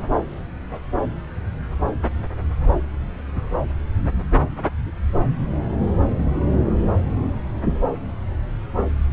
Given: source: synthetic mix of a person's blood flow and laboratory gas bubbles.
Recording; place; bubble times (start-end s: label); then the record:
Doppler ultrasound of blood flow; subclavian vein
no bubbles
From the record:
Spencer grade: 0 (complete lack of bubble signals)